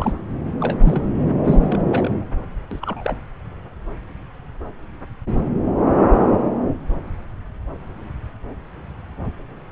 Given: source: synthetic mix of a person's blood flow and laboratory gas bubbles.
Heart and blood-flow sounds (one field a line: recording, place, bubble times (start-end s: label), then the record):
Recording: Doppler ultrasound of blood flow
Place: subclavian vein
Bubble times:
0.00-0.14 s: bubbles
0.59-0.78 s: bubbles
0.81-1.08 s: bubbles
1.44-1.58 s: bubbles
1.61-2.11 s: bubbles
2.71-3.17 s: bubbles
From the record:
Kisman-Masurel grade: 222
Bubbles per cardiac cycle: several, 3 to 8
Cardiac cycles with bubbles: 10 to 50%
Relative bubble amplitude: moderate (0.250 to 0.450)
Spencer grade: 2 (many but less than half of the cardiac periods contain bubble signals, singularly or in groups)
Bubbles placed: anywhere in the cardiac cycle